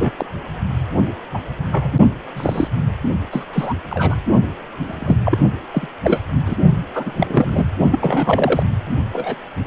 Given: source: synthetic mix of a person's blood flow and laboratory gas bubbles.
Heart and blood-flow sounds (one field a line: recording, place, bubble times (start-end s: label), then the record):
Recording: Doppler ultrasound of blood flow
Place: precordium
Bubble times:
0.00-0.11 s: bubbles
0.17-0.26 s: bubbles
1.33-1.40 s: bubbles
1.72-1.91 s: bubbles
2.35-2.67 s: bubbles
3.32-3.45 s: bubbles
3.53-3.73 s: bubbles
3.90-4.15 s: bubbles
4.84-5.18 s: bubbles
5.25-5.38 s: bubbles
5.72-5.87 s: bubbles
6.03-6.21 s: bubbles
6.46-6.56 s: bubbles
6.93-7.64 s: bubbles
7.91-7.99 s: bubbles
8.02-8.63 s: bubbles
9.13-9.35 s: bubbles
From the record:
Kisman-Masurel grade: 242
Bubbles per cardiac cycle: several, 3 to 8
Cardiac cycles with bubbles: 100%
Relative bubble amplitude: moderate (0.250 to 0.450)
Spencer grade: 3 (all of the cardiac periods contain showers or single bubble signals, but not dominating or overriding the cardiac motion signals)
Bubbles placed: only in the low amplitude regions of the cardiac cycle